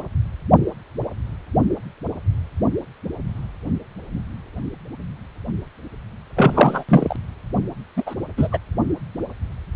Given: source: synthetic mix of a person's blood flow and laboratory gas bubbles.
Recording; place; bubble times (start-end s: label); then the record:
Doppler ultrasound of blood flow; precordium
6.36-6.84 s: bubbles
6.88-7.16 s: bubbles
7.96-8.14 s: bubbles
8.37-8.47 s: bubbles
8.51-8.58 s: bubbles
From the record:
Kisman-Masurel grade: 223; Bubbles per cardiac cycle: several, 3 to 8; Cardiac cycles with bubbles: 10 to 50%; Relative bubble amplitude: loud (0.450 to 0.775); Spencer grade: 2 (many but less than half of the cardiac periods contain bubble signals, singularly or in groups); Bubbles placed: anywhere in the cardiac cycle